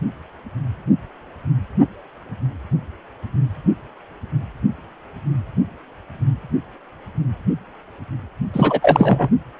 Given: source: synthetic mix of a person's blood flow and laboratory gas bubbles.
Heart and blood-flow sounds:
Doppler ultrasound of blood flow; precordium
8.53-9.29 s: bubbles
From the record:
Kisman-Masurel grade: 213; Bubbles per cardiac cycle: several, 3 to 8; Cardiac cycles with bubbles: 1 to 10%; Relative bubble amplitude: loud (0.450 to 0.775); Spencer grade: 1 (occasional bubble signal discernible with the cardiac motion signal, with majority of cardiac periods free of bubbles); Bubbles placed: only in the low amplitude regions of the cardiac cycle

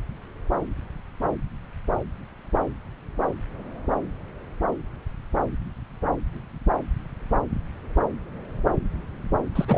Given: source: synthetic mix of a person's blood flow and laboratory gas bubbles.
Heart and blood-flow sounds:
Doppler ultrasound of blood flow; subclavian vein
9.55-9.65 s: bubbles
9.68-9.78 s: bubbles
From the record:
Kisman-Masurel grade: 212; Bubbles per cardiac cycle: several, 3 to 8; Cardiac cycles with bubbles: 1 to 10%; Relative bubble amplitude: moderate (0.250 to 0.450); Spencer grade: 1 (occasional bubble signal discernible with the cardiac motion signal, with majority of cardiac periods free of bubbles); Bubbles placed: anywhere in the cardiac cycle

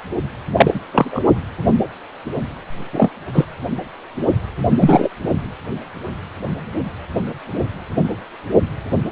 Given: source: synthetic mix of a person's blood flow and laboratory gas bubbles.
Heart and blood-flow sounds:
Doppler ultrasound of blood flow; precordium
0.56-0.79 s: bubbles
0.92-1.21 s: bubbles
2.92-3.09 s: bubbles
3.33-3.44 s: bubbles
4.81-5.08 s: bubbles
From the record:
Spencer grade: 2 (many but less than half of the cardiac periods contain bubble signals, singularly or in groups); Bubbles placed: only in the low amplitude regions of the cardiac cycle

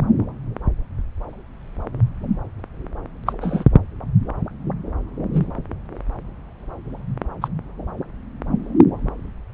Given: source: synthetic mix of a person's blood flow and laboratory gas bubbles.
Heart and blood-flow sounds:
Doppler ultrasound of blood flow; subclavian vein
3.26-3.33 s: bubbles
3.41-3.64 s: bubbles
5.33-5.48 s: bubbles
7.42-7.48 s: bubbles
From the record:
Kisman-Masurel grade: 122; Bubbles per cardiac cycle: 1 to 2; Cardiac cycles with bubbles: 10 to 50%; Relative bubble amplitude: moderate (0.250 to 0.450); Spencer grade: 2 (many but less than half of the cardiac periods contain bubble signals, singularly or in groups); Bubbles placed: anywhere in the cardiac cycle

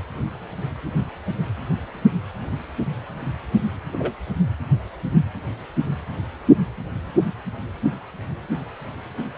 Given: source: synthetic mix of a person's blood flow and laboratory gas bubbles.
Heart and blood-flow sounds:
Doppler ultrasound of blood flow; precordium
3.93-4.14 s: bubbles
From the record:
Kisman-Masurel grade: 112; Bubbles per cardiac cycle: 1 to 2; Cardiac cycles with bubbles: 1 to 10%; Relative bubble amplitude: moderate (0.250 to 0.450); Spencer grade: 1 (occasional bubble signal discernible with the cardiac motion signal, with majority of cardiac periods free of bubbles); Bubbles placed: anywhere in the cardiac cycle

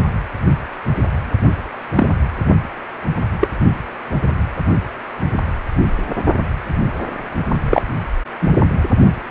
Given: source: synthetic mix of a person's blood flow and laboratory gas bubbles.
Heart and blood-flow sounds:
Doppler ultrasound of blood flow; precordium
1.97-2.08 s: bubbles
3.40-3.48 s: bubbles
7.71-7.82 s: bubbles
8.41-8.52 s: bubbles
From the record:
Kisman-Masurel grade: 123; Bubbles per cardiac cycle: 1 to 2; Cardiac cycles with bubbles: 10 to 50%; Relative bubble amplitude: loud (0.450 to 0.775); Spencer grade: 2 (many but less than half of the cardiac periods contain bubble signals, singularly or in groups); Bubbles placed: only in the low amplitude regions of the cardiac cycle

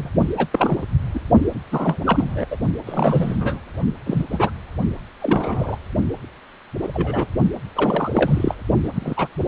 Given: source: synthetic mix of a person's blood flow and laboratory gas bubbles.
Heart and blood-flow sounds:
Doppler ultrasound of blood flow; precordium
0.00-0.10 s: bubbles
0.37-0.48 s: bubbles
0.52-0.83 s: bubbles
1.14-1.20 s: bubbles
1.72-2.46 s: bubbles
2.50-2.57 s: bubbles
2.85-3.37 s: bubbles
3.40-3.59 s: bubbles
4.06-4.24 s: bubbles
4.32-4.50 s: bubbles
5.19-5.77 s: bubbles
6.83-6.89 s: bubbles
6.94-7.27 s: bubbles
7.75-8.54 s: bubbles
8.83-8.90 s: bubbles
8.95-9.27 s: bubbles
From the record:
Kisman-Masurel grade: 242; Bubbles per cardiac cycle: several, 3 to 8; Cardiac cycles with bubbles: 100%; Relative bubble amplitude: moderate (0.250 to 0.450); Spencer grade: 3 (all of the cardiac periods contain showers or single bubble signals, but not dominating or overriding the cardiac motion signals); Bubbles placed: only in the low amplitude regions of the cardiac cycle

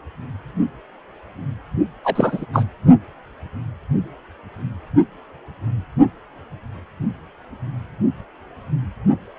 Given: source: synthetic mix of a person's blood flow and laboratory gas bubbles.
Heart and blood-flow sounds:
Doppler ultrasound of blood flow; precordium
2.04-2.46 s: bubbles
2.53-2.66 s: bubbles
From the record:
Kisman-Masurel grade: 223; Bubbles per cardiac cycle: several, 3 to 8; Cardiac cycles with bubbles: 10 to 50%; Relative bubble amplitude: loud (0.450 to 0.775); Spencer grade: 2 (many but less than half of the cardiac periods contain bubble signals, singularly or in groups); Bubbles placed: only in the low amplitude regions of the cardiac cycle

